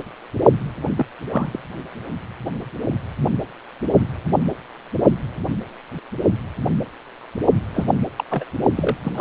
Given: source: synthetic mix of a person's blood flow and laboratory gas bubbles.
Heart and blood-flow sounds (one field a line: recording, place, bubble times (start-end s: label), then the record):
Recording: Doppler ultrasound of blood flow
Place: precordium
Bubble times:
0.96-1.06 s: bubbles
1.29-1.59 s: bubbles
7.74-7.87 s: bubbles
8.18-8.24 s: bubbles
8.30-8.45 s: bubbles
8.76-8.97 s: bubbles
9.04-9.21 s: bubbles
From the record:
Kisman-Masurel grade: 222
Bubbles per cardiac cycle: several, 3 to 8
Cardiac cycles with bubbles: 10 to 50%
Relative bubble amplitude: moderate (0.250 to 0.450)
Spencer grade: 2 (many but less than half of the cardiac periods contain bubble signals, singularly or in groups)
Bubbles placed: only in the low amplitude regions of the cardiac cycle